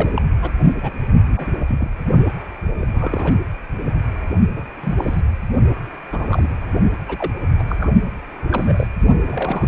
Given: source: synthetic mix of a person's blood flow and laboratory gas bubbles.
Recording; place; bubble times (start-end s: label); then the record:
Doppler ultrasound of blood flow; precordium
0.00-0.13 s: bubbles
0.16-0.22 s: bubbles
0.42-0.51 s: bubbles
0.82-0.91 s: bubbles
1.36-1.47 s: bubbles
1.68-1.90 s: bubbles
2.81-2.85 s: bubbles
2.94-3.36 s: bubbles
4.56-4.63 s: bubbles
4.83-5.21 s: bubbles
6.12-6.57 s: bubbles
7.08-7.32 s: bubbles
7.58-7.63 s: bubbles
7.68-7.75 s: bubbles
7.80-7.92 s: bubbles
8.51-8.88 s: bubbles
9.22-9.68 s: bubbles
From the record:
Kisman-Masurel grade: 242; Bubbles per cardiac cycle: several, 3 to 8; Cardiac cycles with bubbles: 100%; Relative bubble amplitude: moderate (0.250 to 0.450); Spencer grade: 3 (all of the cardiac periods contain showers or single bubble signals, but not dominating or overriding the cardiac motion signals); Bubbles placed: only in the low amplitude regions of the cardiac cycle